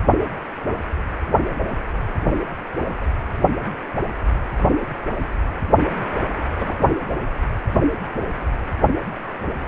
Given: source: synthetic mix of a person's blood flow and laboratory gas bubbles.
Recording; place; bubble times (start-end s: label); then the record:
Doppler ultrasound of blood flow; precordium
6.59-6.89 s: bubbles
From the record:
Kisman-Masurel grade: 111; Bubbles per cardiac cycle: 1 to 2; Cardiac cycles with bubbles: 1 to 10%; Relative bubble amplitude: barely perceptible (0.100 to 0.250); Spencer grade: 1 (occasional bubble signal discernible with the cardiac motion signal, with majority of cardiac periods free of bubbles); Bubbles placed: anywhere in the cardiac cycle